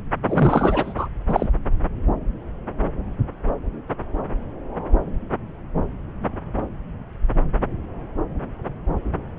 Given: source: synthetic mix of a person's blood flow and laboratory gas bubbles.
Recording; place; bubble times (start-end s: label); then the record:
Doppler ultrasound of blood flow; subclavian vein
0.27-0.94 s: bubbles
0.97-1.06 s: bubbles
1.28-1.50 s: bubbles
From the record:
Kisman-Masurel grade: 222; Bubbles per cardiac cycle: several, 3 to 8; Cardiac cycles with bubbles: 10 to 50%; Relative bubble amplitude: moderate (0.250 to 0.450); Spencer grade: 2 (many but less than half of the cardiac periods contain bubble signals, singularly or in groups); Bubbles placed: anywhere in the cardiac cycle